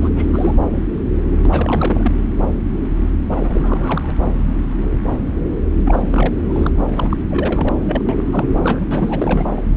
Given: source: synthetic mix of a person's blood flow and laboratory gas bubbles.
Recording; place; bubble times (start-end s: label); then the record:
Doppler ultrasound of blood flow; subclavian vein
0.00-0.10 s: bubbles
0.16-0.26 s: bubbles
0.31-0.53 s: bubbles
1.43-2.11 s: bubbles
3.31-4.12 s: bubbles
4.16-4.32 s: bubbles
5.85-6.34 s: bubbles
6.38-6.71 s: bubbles
6.96-7.17 s: bubbles
7.30-7.75 s: bubbles
7.86-8.02 s: bubbles
8.09-8.56 s: bubbles
8.62-8.86 s: bubbles
8.91-9.62 s: bubbles
From the record:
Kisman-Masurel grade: 332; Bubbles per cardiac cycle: rolling drumbeat, 9 or more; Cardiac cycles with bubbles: 50 to 99%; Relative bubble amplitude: moderate (0.250 to 0.450); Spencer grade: 3 (all of the cardiac periods contain showers or single bubble signals, but not dominating or overriding the cardiac motion signals); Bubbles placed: anywhere in the cardiac cycle